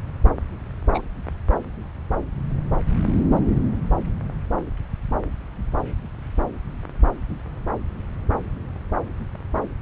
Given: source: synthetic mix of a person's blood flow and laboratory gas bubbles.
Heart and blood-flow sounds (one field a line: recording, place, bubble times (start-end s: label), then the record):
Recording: Doppler ultrasound of blood flow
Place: subclavian vein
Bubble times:
0.93-1.02 s: bubbles
From the record:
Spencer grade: 1 (occasional bubble signal discernible with the cardiac motion signal, with majority of cardiac periods free of bubbles)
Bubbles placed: anywhere in the cardiac cycle